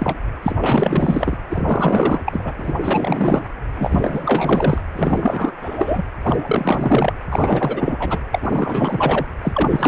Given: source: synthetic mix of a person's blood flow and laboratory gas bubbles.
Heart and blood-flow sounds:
Doppler ultrasound of blood flow; precordium
0.00-0.19 s: bubbles
0.42-0.56 s: bubbles
0.60-1.37 s: bubbles
1.49-2.19 s: bubbles
2.25-2.53 s: bubbles
2.58-2.74 s: bubbles
2.82-3.45 s: bubbles
3.75-4.82 s: bubbles
4.95-5.52 s: bubbles
5.62-6.04 s: bubbles
6.22-7.13 s: bubbles
7.31-8.19 s: bubbles
8.31-9.26 s: bubbles
9.41-9.87 s: bubbles
From the record:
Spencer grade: 4 (maximum detectable bubble signal sounding continuously throughout systole and diastole of every cardiac period, and overriding the amplitude of the normal cardiac signals); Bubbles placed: anywhere in the cardiac cycle

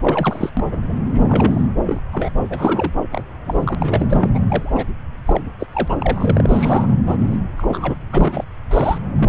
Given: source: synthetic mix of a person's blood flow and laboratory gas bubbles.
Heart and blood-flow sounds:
Doppler ultrasound of blood flow; subclavian vein
0.01-0.50 s: bubbles
0.57-0.65 s: bubbles
0.71-0.77 s: bubbles
0.89-0.94 s: bubbles
1.09-1.22 s: bubbles
1.27-1.68 s: bubbles
1.86-1.99 s: bubbles
2.12-2.32 s: bubbles
2.50-2.92 s: bubbles
3.12-3.24 s: bubbles
3.45-3.75 s: bubbles
3.79-4.28 s: bubbles
4.34-4.40 s: bubbles
4.46-4.85 s: bubbles
5.25-5.41 s: bubbles
5.60-5.67 s: bubbles
5.73-6.96 s: bubbles
7.06-7.16 s: bubbles
7.19-7.38 s: bubbles
7.58-7.96 s: bubbles
8.11-8.45 s: bubbles
8.71-8.98 s: bubbles
9.15-9.29 s: bubbles
From the record:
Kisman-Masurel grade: 242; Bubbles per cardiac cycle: several, 3 to 8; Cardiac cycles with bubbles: 100%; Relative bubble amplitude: moderate (0.250 to 0.450); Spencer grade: 3 (all of the cardiac periods contain showers or single bubble signals, but not dominating or overriding the cardiac motion signals); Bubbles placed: anywhere in the cardiac cycle

